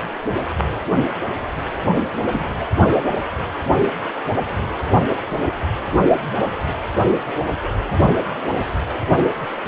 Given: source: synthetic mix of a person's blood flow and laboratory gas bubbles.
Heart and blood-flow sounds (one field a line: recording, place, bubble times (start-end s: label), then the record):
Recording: Doppler ultrasound of blood flow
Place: precordium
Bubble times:
2.31-2.54 s: bubbles
From the record:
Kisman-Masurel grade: 112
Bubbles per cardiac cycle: 1 to 2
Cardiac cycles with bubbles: 1 to 10%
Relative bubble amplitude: moderate (0.250 to 0.450)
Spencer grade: 1 (occasional bubble signal discernible with the cardiac motion signal, with majority of cardiac periods free of bubbles)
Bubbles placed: anywhere in the cardiac cycle